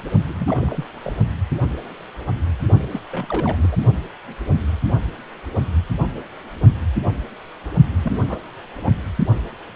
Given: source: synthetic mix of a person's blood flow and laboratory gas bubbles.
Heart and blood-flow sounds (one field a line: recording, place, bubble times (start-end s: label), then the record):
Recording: Doppler ultrasound of blood flow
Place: precordium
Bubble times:
0.26-0.85 s: bubbles
1.04-1.13 s: bubbles
2.90-3.00 s: bubbles
3.10-3.57 s: bubbles
3.62-3.68 s: bubbles
3.71-3.77 s: bubbles
7.97-8.39 s: bubbles
8.82-8.92 s: bubbles
From the record:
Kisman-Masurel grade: 221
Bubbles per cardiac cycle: several, 3 to 8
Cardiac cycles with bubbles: 10 to 50%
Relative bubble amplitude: barely perceptible (0.100 to 0.250)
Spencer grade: 2 (many but less than half of the cardiac periods contain bubble signals, singularly or in groups)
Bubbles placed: only in the low amplitude regions of the cardiac cycle